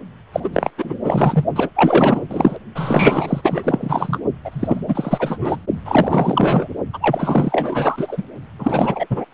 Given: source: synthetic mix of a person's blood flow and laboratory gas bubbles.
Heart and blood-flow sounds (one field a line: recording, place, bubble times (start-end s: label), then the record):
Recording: Doppler ultrasound of blood flow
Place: precordium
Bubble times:
0.33-0.41 s: bubbles
0.44-0.49 s: bubbles
0.52-0.71 s: bubbles
0.77-0.95 s: bubbles
1.03-1.45 s: bubbles
1.56-1.70 s: bubbles
1.75-2.23 s: bubbles
2.29-2.58 s: bubbles
2.75-4.18 s: bubbles
4.44-4.81 s: bubbles
4.88-5.56 s: bubbles
5.85-6.68 s: bubbles
6.93-8.23 s: bubbles
8.59-9.06 s: bubbles
9.09-9.24 s: bubbles
From the record:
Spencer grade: 4 (maximum detectable bubble signal sounding continuously throughout systole and diastole of every cardiac period, and overriding the amplitude of the normal cardiac signals)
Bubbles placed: only in the low amplitude regions of the cardiac cycle